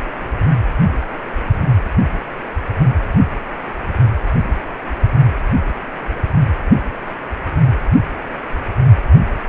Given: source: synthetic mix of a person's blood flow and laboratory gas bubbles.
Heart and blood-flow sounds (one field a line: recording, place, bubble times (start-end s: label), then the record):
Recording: Doppler ultrasound of blood flow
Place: precordium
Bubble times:
no bubbles
From the record:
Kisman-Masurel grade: 000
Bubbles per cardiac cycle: 0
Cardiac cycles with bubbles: 0%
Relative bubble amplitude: no bubbles discernible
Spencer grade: 0 (complete lack of bubble signals)